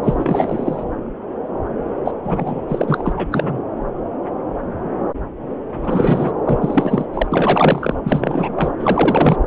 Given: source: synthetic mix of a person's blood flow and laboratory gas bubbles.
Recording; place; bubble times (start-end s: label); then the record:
Doppler ultrasound of blood flow; subclavian vein
0.03-0.83 s: bubbles
2.04-2.11 s: bubbles
2.23-2.61 s: bubbles
2.68-3.14 s: bubbles
3.16-3.27 s: bubbles
3.31-3.57 s: bubbles
5.79-6.33 s: bubbles
6.46-7.06 s: bubbles
7.13-7.27 s: bubbles
7.32-7.95 s: bubbles
8.04-8.72 s: bubbles
8.79-9.37 s: bubbles
From the record:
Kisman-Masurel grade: 333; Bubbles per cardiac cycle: rolling drumbeat, 9 or more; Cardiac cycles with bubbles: 50 to 99%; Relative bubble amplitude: loud (0.450 to 0.775); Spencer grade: 3 (all of the cardiac periods contain showers or single bubble signals, but not dominating or overriding the cardiac motion signals); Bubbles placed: anywhere in the cardiac cycle